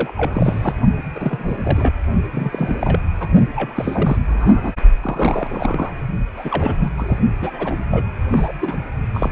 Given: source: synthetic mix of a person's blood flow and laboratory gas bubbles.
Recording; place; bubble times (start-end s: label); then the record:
Doppler ultrasound of blood flow; precordium
0.00-0.13 s: bubbles
0.16-0.74 s: bubbles
1.16-1.94 s: bubbles
2.32-3.00 s: bubbles
3.19-3.29 s: bubbles
3.54-4.17 s: bubbles
4.28-4.73 s: bubbles
5.01-5.92 s: bubbles
6.36-6.89 s: bubbles
6.97-7.18 s: bubbles
7.40-7.74 s: bubbles
7.91-8.04 s: bubbles
8.30-8.52 s: bubbles
8.61-8.79 s: bubbles
9.13-9.29 s: bubbles
From the record:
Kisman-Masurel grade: 342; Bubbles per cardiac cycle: rolling drumbeat, 9 or more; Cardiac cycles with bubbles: 100%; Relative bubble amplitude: moderate (0.250 to 0.450); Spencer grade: 3 (all of the cardiac periods contain showers or single bubble signals, but not dominating or overriding the cardiac motion signals); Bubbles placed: only in the low amplitude regions of the cardiac cycle